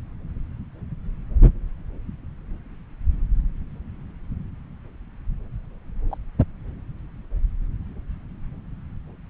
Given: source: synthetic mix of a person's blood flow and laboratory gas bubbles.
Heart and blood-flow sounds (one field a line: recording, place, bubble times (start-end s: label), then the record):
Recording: Doppler ultrasound of blood flow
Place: subclavian vein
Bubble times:
6.08-6.17 s: bubbles
From the record:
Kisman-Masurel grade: 111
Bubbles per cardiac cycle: 1 to 2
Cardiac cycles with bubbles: 1 to 10%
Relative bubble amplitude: barely perceptible (0.100 to 0.250)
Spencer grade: 1 (occasional bubble signal discernible with the cardiac motion signal, with majority of cardiac periods free of bubbles)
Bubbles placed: anywhere in the cardiac cycle